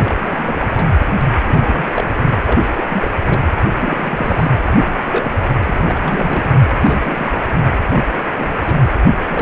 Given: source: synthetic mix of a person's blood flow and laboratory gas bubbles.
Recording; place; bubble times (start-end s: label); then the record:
Doppler ultrasound of blood flow; precordium
0.00-0.69 s: bubbles
0.77-0.89 s: bubbles
1.47-1.92 s: bubbles
1.96-2.41 s: bubbles
2.46-2.60 s: bubbles
2.77-2.83 s: bubbles
2.89-3.14 s: bubbles
3.26-3.41 s: bubbles
3.79-4.52 s: bubbles
4.65-5.33 s: bubbles
5.67-6.56 s: bubbles
6.84-7.32 s: bubbles
7.92-8.06 s: bubbles
8.18-8.53 s: bubbles
8.61-8.93 s: bubbles
9.18-9.42 s: bubbles
From the record:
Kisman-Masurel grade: 342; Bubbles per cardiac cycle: rolling drumbeat, 9 or more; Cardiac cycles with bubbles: 100%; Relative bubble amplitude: moderate (0.250 to 0.450); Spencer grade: 3 (all of the cardiac periods contain showers or single bubble signals, but not dominating or overriding the cardiac motion signals); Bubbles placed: anywhere in the cardiac cycle